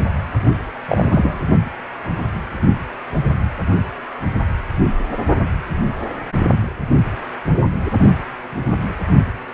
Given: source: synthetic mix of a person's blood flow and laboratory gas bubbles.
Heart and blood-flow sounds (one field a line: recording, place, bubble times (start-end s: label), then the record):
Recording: Doppler ultrasound of blood flow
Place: precordium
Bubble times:
0.88-1.39 s: bubbles
From the record:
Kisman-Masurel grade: 123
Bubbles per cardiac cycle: 1 to 2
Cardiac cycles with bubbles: 10 to 50%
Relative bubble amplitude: loud (0.450 to 0.775)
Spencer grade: 2 (many but less than half of the cardiac periods contain bubble signals, singularly or in groups)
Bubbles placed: only in the low amplitude regions of the cardiac cycle